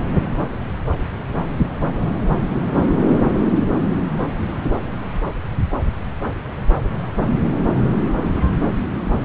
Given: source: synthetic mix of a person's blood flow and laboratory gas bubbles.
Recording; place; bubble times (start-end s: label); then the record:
Doppler ultrasound of blood flow; subclavian vein
no bubbles
From the record:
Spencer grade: 0 (complete lack of bubble signals)